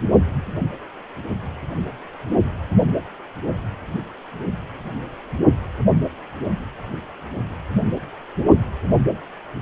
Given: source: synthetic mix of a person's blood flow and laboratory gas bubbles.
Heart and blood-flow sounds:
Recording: Doppler ultrasound of blood flow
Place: precordium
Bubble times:
no bubbles
From the record:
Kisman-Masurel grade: 000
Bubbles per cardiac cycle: 0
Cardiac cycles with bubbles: 0%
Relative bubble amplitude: no bubbles discernible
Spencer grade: 0 (complete lack of bubble signals)

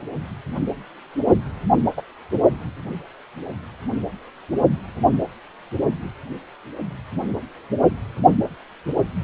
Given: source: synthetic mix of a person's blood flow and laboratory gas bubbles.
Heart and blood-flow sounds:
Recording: Doppler ultrasound of blood flow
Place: precordium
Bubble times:
1.97-2.01 s: bubbles
From the record:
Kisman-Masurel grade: 123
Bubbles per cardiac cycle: 1 to 2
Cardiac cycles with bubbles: 10 to 50%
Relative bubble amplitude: loud (0.450 to 0.775)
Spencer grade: 2 (many but less than half of the cardiac periods contain bubble signals, singularly or in groups)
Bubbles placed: only in the low amplitude regions of the cardiac cycle

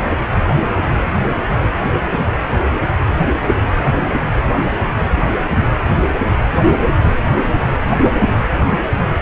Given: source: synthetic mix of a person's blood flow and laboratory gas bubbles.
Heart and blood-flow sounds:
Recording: Doppler ultrasound of blood flow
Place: precordium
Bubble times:
no bubbles
From the record:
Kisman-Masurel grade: 000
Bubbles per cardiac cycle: 0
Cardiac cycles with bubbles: 0%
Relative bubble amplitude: no bubbles discernible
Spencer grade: 0 (complete lack of bubble signals)

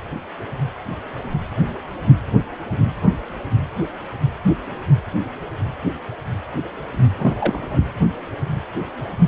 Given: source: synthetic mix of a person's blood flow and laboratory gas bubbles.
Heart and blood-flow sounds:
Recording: Doppler ultrasound of blood flow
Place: precordium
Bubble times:
7.19-7.36 s: bubbles
7.39-7.83 s: bubbles
From the record:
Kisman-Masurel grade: 222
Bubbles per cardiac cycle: several, 3 to 8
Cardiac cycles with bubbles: 10 to 50%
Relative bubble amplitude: moderate (0.250 to 0.450)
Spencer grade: 2 (many but less than half of the cardiac periods contain bubble signals, singularly or in groups)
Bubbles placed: anywhere in the cardiac cycle

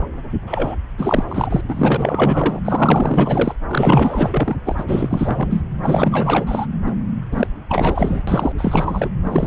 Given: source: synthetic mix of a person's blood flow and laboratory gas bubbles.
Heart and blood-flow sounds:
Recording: Doppler ultrasound of blood flow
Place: subclavian vein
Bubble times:
0.46-0.77 s: bubbles
0.98-1.24 s: bubbles
1.27-1.61 s: bubbles
1.68-2.60 s: bubbles
2.65-3.55 s: bubbles
3.69-4.56 s: bubbles
4.66-4.75 s: bubbles
4.78-4.85 s: bubbles
4.88-5.63 s: bubbles
5.83-6.66 s: bubbles
6.86-6.93 s: bubbles
7.31-7.49 s: bubbles
7.69-8.22 s: bubbles
8.27-8.52 s: bubbles
8.57-9.09 s: bubbles
9.24-9.47 s: bubbles
From the record:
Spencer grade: 4 (maximum detectable bubble signal sounding continuously throughout systole and diastole of every cardiac period, and overriding the amplitude of the normal cardiac signals)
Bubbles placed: anywhere in the cardiac cycle

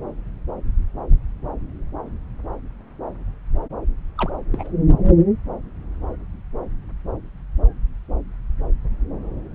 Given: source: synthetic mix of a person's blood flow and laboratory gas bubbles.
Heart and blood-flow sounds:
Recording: Doppler ultrasound of blood flow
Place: subclavian vein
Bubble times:
4.17-4.30 s: bubbles
4.51-4.71 s: bubbles
From the record:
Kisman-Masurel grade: 211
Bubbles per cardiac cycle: several, 3 to 8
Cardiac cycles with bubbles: 1 to 10%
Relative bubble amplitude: barely perceptible (0.100 to 0.250)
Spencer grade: 1 (occasional bubble signal discernible with the cardiac motion signal, with majority of cardiac periods free of bubbles)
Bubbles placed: anywhere in the cardiac cycle

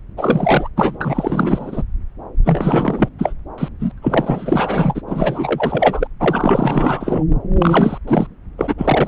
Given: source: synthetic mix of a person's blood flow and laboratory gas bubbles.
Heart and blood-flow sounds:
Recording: Doppler ultrasound of blood flow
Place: subclavian vein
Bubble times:
0.17-0.69 s: bubbles
0.76-1.82 s: bubbles
2.44-3.09 s: bubbles
3.18-3.33 s: bubbles
3.58-3.69 s: bubbles
3.79-3.92 s: bubbles
4.02-5.02 s: bubbles
5.07-6.08 s: bubbles
6.20-7.24 s: bubbles
7.59-7.98 s: bubbles
8.07-8.26 s: bubbles
8.57-8.74 s: bubbles
8.78-9.08 s: bubbles
From the record:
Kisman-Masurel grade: 444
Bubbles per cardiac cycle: continuous sound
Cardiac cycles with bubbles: 100%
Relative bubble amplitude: maximal (0.775 to 0.999)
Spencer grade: 4 (maximum detectable bubble signal sounding continuously throughout systole and diastole of every cardiac period, and overriding the amplitude of the normal cardiac signals)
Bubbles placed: anywhere in the cardiac cycle

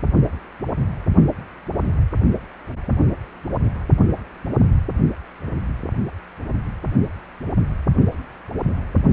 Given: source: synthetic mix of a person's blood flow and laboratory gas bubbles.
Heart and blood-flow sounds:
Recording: Doppler ultrasound of blood flow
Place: precordium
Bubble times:
no bubbles
From the record:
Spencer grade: 0 (complete lack of bubble signals)

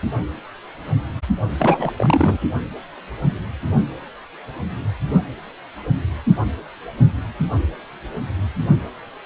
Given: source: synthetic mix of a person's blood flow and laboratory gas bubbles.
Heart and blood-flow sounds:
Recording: Doppler ultrasound of blood flow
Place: precordium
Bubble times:
1.59-1.91 s: bubbles
1.97-2.38 s: bubbles
From the record:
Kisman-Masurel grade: 223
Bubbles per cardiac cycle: several, 3 to 8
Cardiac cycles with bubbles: 10 to 50%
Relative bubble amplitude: loud (0.450 to 0.775)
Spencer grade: 2 (many but less than half of the cardiac periods contain bubble signals, singularly or in groups)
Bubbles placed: only in the low amplitude regions of the cardiac cycle

